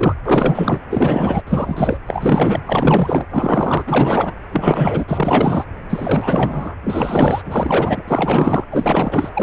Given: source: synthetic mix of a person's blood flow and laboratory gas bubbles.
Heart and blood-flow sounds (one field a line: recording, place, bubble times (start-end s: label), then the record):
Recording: Doppler ultrasound of blood flow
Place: precordium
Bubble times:
0.00-0.15 s: bubbles
0.25-0.79 s: bubbles
0.89-1.42 s: bubbles
1.46-1.97 s: bubbles
2.06-2.61 s: bubbles
2.66-3.25 s: bubbles
3.30-3.84 s: bubbles
3.87-4.33 s: bubbles
4.51-5.04 s: bubbles
5.08-5.64 s: bubbles
5.89-6.75 s: bubbles
6.83-7.42 s: bubbles
7.45-8.03 s: bubbles
8.07-8.65 s: bubbles
8.71-9.43 s: bubbles
From the record:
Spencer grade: 4 (maximum detectable bubble signal sounding continuously throughout systole and diastole of every cardiac period, and overriding the amplitude of the normal cardiac signals)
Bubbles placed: anywhere in the cardiac cycle